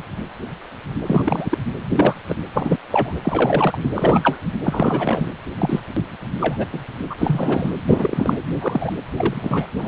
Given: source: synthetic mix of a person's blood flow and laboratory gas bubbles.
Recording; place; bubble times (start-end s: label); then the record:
Doppler ultrasound of blood flow; precordium
1.06-1.58 s: bubbles
1.89-2.15 s: bubbles
2.28-2.35 s: bubbles
2.54-2.77 s: bubbles
2.91-3.14 s: bubbles
3.24-3.90 s: bubbles
3.94-4.38 s: bubbles
4.65-5.28 s: bubbles
5.58-5.80 s: bubbles
6.40-6.67 s: bubbles
6.73-6.79 s: bubbles
7.03-7.15 s: bubbles
7.18-7.70 s: bubbles
7.87-8.38 s: bubbles
8.61-8.93 s: bubbles
9.10-9.67 s: bubbles
9.75-9.88 s: bubbles
From the record:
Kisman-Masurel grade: 233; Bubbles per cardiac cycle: several, 3 to 8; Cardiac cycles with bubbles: 50 to 99%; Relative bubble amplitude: loud (0.450 to 0.775); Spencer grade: 3 (all of the cardiac periods contain showers or single bubble signals, but not dominating or overriding the cardiac motion signals); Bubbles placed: anywhere in the cardiac cycle